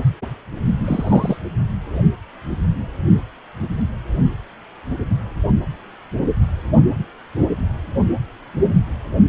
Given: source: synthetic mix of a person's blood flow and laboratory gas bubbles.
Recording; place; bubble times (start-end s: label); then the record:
Doppler ultrasound of blood flow; precordium
0.84-1.37 s: bubbles
From the record:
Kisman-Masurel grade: 112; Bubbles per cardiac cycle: 1 to 2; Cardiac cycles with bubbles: 1 to 10%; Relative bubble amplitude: moderate (0.250 to 0.450); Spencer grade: 1 (occasional bubble signal discernible with the cardiac motion signal, with majority of cardiac periods free of bubbles); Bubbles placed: anywhere in the cardiac cycle